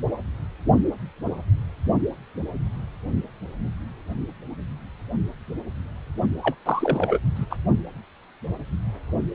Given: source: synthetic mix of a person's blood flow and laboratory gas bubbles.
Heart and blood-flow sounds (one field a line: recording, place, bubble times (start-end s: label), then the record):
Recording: Doppler ultrasound of blood flow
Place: precordium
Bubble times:
6.42-6.55 s: bubbles
6.65-7.19 s: bubbles
7.35-7.45 s: bubbles
7.50-7.56 s: bubbles
From the record:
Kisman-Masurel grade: 212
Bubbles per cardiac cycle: several, 3 to 8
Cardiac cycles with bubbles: 1 to 10%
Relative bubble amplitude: moderate (0.250 to 0.450)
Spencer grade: 1 (occasional bubble signal discernible with the cardiac motion signal, with majority of cardiac periods free of bubbles)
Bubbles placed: only in the low amplitude regions of the cardiac cycle